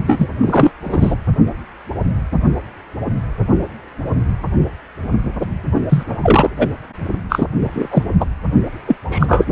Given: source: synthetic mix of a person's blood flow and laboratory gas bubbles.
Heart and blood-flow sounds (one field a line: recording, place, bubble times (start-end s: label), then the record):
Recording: Doppler ultrasound of blood flow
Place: precordium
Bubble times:
0.06-0.30 s: bubbles
0.41-0.71 s: bubbles
0.84-1.16 s: bubbles
5.89-6.03 s: bubbles
6.23-6.50 s: bubbles
6.58-6.68 s: bubbles
7.29-7.46 s: bubbles
7.59-7.88 s: bubbles
7.91-8.03 s: bubbles
8.20-8.26 s: bubbles
8.87-8.96 s: bubbles
9.10-9.47 s: bubbles
From the record:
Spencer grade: 3 (all of the cardiac periods contain showers or single bubble signals, but not dominating or overriding the cardiac motion signals)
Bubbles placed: only in the low amplitude regions of the cardiac cycle